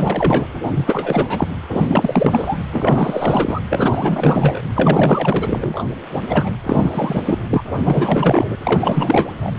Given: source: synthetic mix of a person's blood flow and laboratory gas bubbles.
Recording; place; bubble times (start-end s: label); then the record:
Doppler ultrasound of blood flow; precordium
0.00-0.46 s: bubbles
0.62-1.48 s: bubbles
1.72-2.64 s: bubbles
2.71-3.60 s: bubbles
3.69-4.62 s: bubbles
4.75-5.84 s: bubbles
6.29-6.49 s: bubbles
6.63-7.23 s: bubbles
7.26-7.74 s: bubbles
7.83-8.47 s: bubbles
8.64-9.33 s: bubbles
9.40-9.51 s: bubbles
From the record:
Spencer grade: 4 (maximum detectable bubble signal sounding continuously throughout systole and diastole of every cardiac period, and overriding the amplitude of the normal cardiac signals); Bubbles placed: anywhere in the cardiac cycle